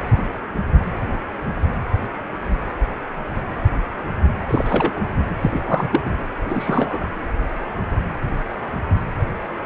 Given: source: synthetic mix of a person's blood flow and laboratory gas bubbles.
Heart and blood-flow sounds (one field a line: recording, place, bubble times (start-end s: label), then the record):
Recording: Doppler ultrasound of blood flow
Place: precordium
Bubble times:
4.48-5.05 s: bubbles
5.41-6.01 s: bubbles
6.05-6.13 s: bubbles
6.42-7.08 s: bubbles
From the record:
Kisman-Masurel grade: 222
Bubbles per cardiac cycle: several, 3 to 8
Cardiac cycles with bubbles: 10 to 50%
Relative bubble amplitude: moderate (0.250 to 0.450)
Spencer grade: 2 (many but less than half of the cardiac periods contain bubble signals, singularly or in groups)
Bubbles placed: anywhere in the cardiac cycle